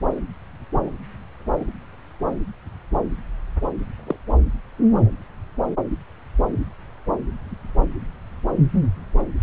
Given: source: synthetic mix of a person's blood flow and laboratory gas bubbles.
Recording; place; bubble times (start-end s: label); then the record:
Doppler ultrasound of blood flow; subclavian vein
4.07-4.16 s: bubbles
From the record:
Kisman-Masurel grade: 112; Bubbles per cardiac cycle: 1 to 2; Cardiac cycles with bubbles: 1 to 10%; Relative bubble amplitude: moderate (0.250 to 0.450); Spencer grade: 1 (occasional bubble signal discernible with the cardiac motion signal, with majority of cardiac periods free of bubbles); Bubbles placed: anywhere in the cardiac cycle